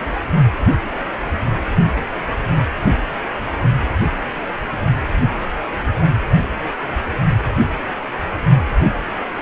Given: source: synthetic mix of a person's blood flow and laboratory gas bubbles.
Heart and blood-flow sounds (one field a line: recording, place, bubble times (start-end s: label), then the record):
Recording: Doppler ultrasound of blood flow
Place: precordium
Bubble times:
no bubbles
From the record:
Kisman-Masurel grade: 000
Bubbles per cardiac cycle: 0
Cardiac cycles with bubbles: 0%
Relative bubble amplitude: no bubbles discernible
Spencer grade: 0 (complete lack of bubble signals)